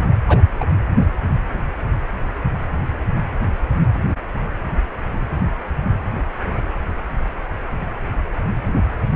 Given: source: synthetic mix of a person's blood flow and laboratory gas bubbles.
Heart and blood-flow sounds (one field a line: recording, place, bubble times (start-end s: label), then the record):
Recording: Doppler ultrasound of blood flow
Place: precordium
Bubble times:
0.28-0.41 s: bubbles
0.60-0.65 s: bubbles
From the record:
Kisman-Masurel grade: 113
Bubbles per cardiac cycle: 1 to 2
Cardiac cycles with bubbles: 1 to 10%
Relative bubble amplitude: loud (0.450 to 0.775)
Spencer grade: 1 (occasional bubble signal discernible with the cardiac motion signal, with majority of cardiac periods free of bubbles)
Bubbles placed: anywhere in the cardiac cycle